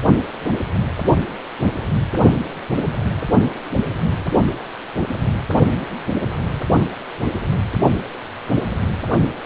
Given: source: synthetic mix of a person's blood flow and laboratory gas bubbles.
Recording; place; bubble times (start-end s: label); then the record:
Doppler ultrasound of blood flow; precordium
no bubbles
From the record:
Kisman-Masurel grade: 000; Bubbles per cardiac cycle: 0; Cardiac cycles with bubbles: 0%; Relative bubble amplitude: no bubbles discernible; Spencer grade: 0 (complete lack of bubble signals)